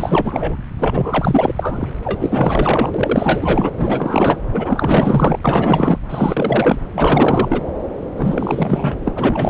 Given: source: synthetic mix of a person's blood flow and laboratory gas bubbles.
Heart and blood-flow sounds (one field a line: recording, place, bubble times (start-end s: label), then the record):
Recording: Doppler ultrasound of blood flow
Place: subclavian vein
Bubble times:
0.00-0.57 s: bubbles
0.79-1.88 s: bubbles
2.04-3.69 s: bubbles
3.76-4.37 s: bubbles
4.54-5.37 s: bubbles
5.44-5.99 s: bubbles
6.09-6.79 s: bubbles
6.93-7.67 s: bubbles
8.16-8.95 s: bubbles
9.05-9.11 s: bubbles
9.15-9.50 s: bubbles
From the record:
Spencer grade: 4 (maximum detectable bubble signal sounding continuously throughout systole and diastole of every cardiac period, and overriding the amplitude of the normal cardiac signals)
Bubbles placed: anywhere in the cardiac cycle